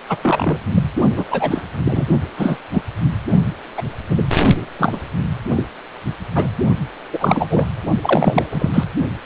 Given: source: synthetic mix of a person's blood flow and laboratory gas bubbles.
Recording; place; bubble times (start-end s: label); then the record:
Doppler ultrasound of blood flow; precordium
0.09-0.17 s: bubbles
0.22-0.58 s: bubbles
0.75-0.83 s: bubbles
1.17-1.26 s: bubbles
1.31-1.65 s: bubbles
1.85-2.05 s: bubbles
2.37-2.57 s: bubbles
2.72-2.83 s: bubbles
3.77-3.83 s: bubbles
4.10-4.25 s: bubbles
4.78-5.00 s: bubbles
5.55-5.67 s: bubbles
6.35-6.48 s: bubbles
7.12-7.66 s: bubbles
8.01-8.47 s: bubbles
8.50-8.84 s: bubbles
From the record:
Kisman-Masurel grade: 233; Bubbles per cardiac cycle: several, 3 to 8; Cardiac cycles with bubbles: 50 to 99%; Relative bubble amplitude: loud (0.450 to 0.775); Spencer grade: 3 (all of the cardiac periods contain showers or single bubble signals, but not dominating or overriding the cardiac motion signals); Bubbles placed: only in the low amplitude regions of the cardiac cycle